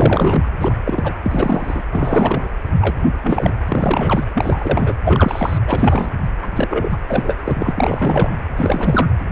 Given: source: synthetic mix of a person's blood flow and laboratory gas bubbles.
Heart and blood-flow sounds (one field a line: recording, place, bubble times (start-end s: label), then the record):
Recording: Doppler ultrasound of blood flow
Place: precordium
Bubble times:
0.00-0.47 s: bubbles
0.60-0.75 s: bubbles
0.85-1.16 s: bubbles
1.23-1.84 s: bubbles
1.93-2.49 s: bubbles
2.80-3.06 s: bubbles
3.22-3.52 s: bubbles
3.68-4.25 s: bubbles
4.34-4.93 s: bubbles
5.04-5.58 s: bubbles
5.67-6.09 s: bubbles
6.42-6.47 s: bubbles
6.55-6.98 s: bubbles
7.08-7.34 s: bubbles
7.44-8.33 s: bubbles
8.56-9.08 s: bubbles
From the record:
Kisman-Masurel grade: 343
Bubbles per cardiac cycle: rolling drumbeat, 9 or more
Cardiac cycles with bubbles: 100%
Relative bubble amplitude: loud (0.450 to 0.775)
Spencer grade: 3 (all of the cardiac periods contain showers or single bubble signals, but not dominating or overriding the cardiac motion signals)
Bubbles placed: anywhere in the cardiac cycle